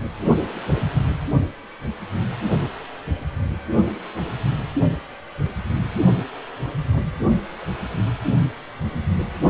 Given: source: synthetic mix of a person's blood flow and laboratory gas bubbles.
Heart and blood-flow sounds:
Doppler ultrasound of blood flow; precordium
5.38-5.55 s: bubbles
6.16-6.22 s: bubbles
6.92-7.02 s: bubbles
7.60-7.65 s: bubbles
From the record:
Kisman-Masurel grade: 121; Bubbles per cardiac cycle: 1 to 2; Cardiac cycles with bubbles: 10 to 50%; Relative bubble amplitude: barely perceptible (0.100 to 0.250); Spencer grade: 2 (many but less than half of the cardiac periods contain bubble signals, singularly or in groups); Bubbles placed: only in the low amplitude regions of the cardiac cycle

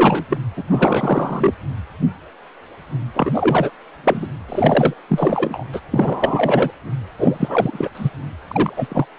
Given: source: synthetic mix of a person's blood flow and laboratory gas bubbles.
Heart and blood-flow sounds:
Doppler ultrasound of blood flow; precordium
0.00-0.25 s: bubbles
0.29-0.37 s: bubbles
0.56-0.64 s: bubbles
0.70-1.54 s: bubbles
3.13-3.71 s: bubbles
4.04-4.28 s: bubbles
4.49-4.94 s: bubbles
5.08-5.64 s: bubbles
5.72-5.81 s: bubbles
5.91-6.71 s: bubbles
7.18-7.90 s: bubbles
7.94-8.10 s: bubbles
8.47-9.05 s: bubbles
From the record:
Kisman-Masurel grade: 333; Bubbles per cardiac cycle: rolling drumbeat, 9 or more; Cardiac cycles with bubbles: 50 to 99%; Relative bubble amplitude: loud (0.450 to 0.775); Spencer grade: 3 (all of the cardiac periods contain showers or single bubble signals, but not dominating or overriding the cardiac motion signals); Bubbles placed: anywhere in the cardiac cycle

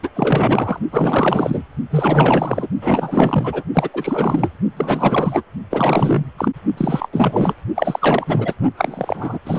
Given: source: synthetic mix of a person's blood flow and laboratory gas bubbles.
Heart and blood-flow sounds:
Doppler ultrasound of blood flow; precordium
0.00-0.09 s: bubbles
0.15-0.79 s: bubbles
0.92-1.65 s: bubbles
1.90-2.68 s: bubbles
2.81-3.63 s: bubbles
3.74-3.89 s: bubbles
3.93-4.50 s: bubbles
4.76-5.42 s: bubbles
5.70-6.25 s: bubbles
6.38-6.51 s: bubbles
6.77-7.09 s: bubbles
7.12-7.54 s: bubbles
7.75-8.54 s: bubbles
8.77-9.39 s: bubbles
9.45-9.59 s: bubbles
From the record:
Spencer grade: 4 (maximum detectable bubble signal sounding continuously throughout systole and diastole of every cardiac period, and overriding the amplitude of the normal cardiac signals); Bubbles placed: only in the low amplitude regions of the cardiac cycle

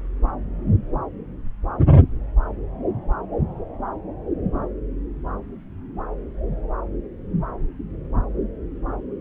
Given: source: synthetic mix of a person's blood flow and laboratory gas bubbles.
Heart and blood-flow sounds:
Doppler ultrasound of blood flow; subclavian vein
no bubbles
From the record:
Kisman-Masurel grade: 000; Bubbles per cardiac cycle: 0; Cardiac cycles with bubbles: 0%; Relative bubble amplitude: no bubbles discernible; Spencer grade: 0 (complete lack of bubble signals)

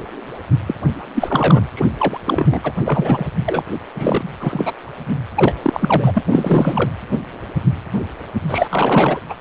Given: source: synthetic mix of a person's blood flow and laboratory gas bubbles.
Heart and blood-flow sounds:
Doppler ultrasound of blood flow; precordium
0.67-0.74 s: bubbles
1.13-1.67 s: bubbles
1.74-1.90 s: bubbles
1.98-2.20 s: bubbles
2.25-2.60 s: bubbles
2.64-2.72 s: bubbles
2.84-3.25 s: bubbles
3.46-3.63 s: bubbles
3.95-4.24 s: bubbles
4.40-4.73 s: bubbles
5.34-5.55 s: bubbles
5.62-6.11 s: bubbles
6.14-6.22 s: bubbles
6.29-6.90 s: bubbles
8.48-9.21 s: bubbles
9.29-9.34 s: bubbles
From the record:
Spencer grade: 3 (all of the cardiac periods contain showers or single bubble signals, but not dominating or overriding the cardiac motion signals); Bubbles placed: anywhere in the cardiac cycle

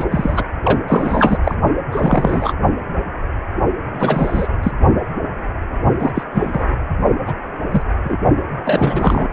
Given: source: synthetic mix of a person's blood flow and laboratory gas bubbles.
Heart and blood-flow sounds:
Doppler ultrasound of blood flow; precordium
0.00-0.05 s: bubbles
0.11-0.44 s: bubbles
0.63-0.78 s: bubbles
0.88-1.38 s: bubbles
1.44-1.55 s: bubbles
1.91-2.53 s: bubbles
3.93-4.48 s: bubbles
4.63-4.71 s: bubbles
5.99-6.12 s: bubbles
6.15-6.24 s: bubbles
6.33-6.64 s: bubbles
7.25-7.35 s: bubbles
7.71-7.82 s: bubbles
8.04-8.16 s: bubbles
8.64-9.29 s: bubbles
From the record:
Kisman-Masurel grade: 233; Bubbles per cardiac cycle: several, 3 to 8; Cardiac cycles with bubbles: 50 to 99%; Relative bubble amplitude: loud (0.450 to 0.775); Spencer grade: 3 (all of the cardiac periods contain showers or single bubble signals, but not dominating or overriding the cardiac motion signals); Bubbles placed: only in the low amplitude regions of the cardiac cycle

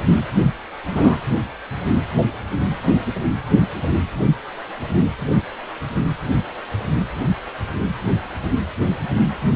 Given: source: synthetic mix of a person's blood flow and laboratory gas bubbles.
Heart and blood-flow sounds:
Doppler ultrasound of blood flow; precordium
0.91-1.17 s: bubbles
From the record:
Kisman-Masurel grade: 112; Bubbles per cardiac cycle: 1 to 2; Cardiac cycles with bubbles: 1 to 10%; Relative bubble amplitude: moderate (0.250 to 0.450); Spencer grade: 1 (occasional bubble signal discernible with the cardiac motion signal, with majority of cardiac periods free of bubbles); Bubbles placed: anywhere in the cardiac cycle

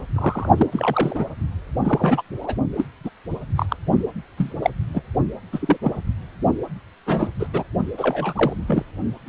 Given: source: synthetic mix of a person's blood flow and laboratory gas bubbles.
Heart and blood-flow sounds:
Doppler ultrasound of blood flow; precordium
0.15-0.49 s: bubbles
0.57-0.67 s: bubbles
0.72-1.25 s: bubbles
1.84-2.21 s: bubbles
2.41-2.54 s: bubbles
2.75-2.85 s: bubbles
3.04-3.09 s: bubbles
3.56-3.66 s: bubbles
3.68-3.76 s: bubbles
4.37-4.54 s: bubbles
4.62-4.70 s: bubbles
4.94-5.01 s: bubbles
5.52-5.77 s: bubbles
5.81-5.99 s: bubbles
7.06-7.27 s: bubbles
7.39-7.47 s: bubbles
7.53-7.63 s: bubbles
7.98-8.53 s: bubbles
8.68-8.83 s: bubbles
9.26-9.29 s: bubbles
From the record:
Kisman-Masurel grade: 242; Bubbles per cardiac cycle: several, 3 to 8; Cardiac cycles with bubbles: 100%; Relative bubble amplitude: moderate (0.250 to 0.450); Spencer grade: 3 (all of the cardiac periods contain showers or single bubble signals, but not dominating or overriding the cardiac motion signals); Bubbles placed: only in the low amplitude regions of the cardiac cycle

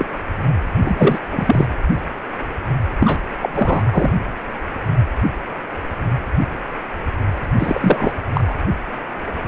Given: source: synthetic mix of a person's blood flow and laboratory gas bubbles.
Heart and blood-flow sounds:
Doppler ultrasound of blood flow; precordium
0.00-0.06 s: bubbles
0.82-1.20 s: bubbles
1.31-1.67 s: bubbles
2.98-3.21 s: bubbles
3.42-3.50 s: bubbles
3.54-3.83 s: bubbles
3.91-4.11 s: bubbles
7.59-8.21 s: bubbles
8.34-8.54 s: bubbles
From the record:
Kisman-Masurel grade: 223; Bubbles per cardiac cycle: several, 3 to 8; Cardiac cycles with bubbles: 10 to 50%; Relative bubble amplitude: loud (0.450 to 0.775); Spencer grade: 2 (many but less than half of the cardiac periods contain bubble signals, singularly or in groups); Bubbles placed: anywhere in the cardiac cycle

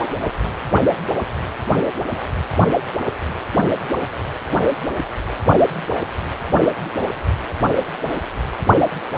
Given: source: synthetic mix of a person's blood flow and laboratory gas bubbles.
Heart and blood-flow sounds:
Doppler ultrasound of blood flow; precordium
no bubbles
From the record:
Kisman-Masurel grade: 000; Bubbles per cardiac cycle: 0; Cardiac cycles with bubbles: 0%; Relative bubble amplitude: no bubbles discernible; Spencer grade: 0 (complete lack of bubble signals)

